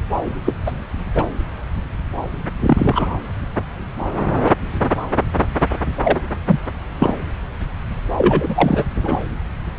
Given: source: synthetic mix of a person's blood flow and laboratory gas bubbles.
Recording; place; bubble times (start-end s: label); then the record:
Doppler ultrasound of blood flow; subclavian vein
0.45-0.55 s: bubbles
0.66-0.71 s: bubbles
1.15-1.23 s: bubbles
2.66-3.08 s: bubbles
6.04-6.21 s: bubbles
6.46-6.59 s: bubbles
7.00-7.14 s: bubbles
8.17-8.84 s: bubbles
9.03-9.20 s: bubbles
From the record:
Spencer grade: 2 (many but less than half of the cardiac periods contain bubble signals, singularly or in groups); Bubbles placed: anywhere in the cardiac cycle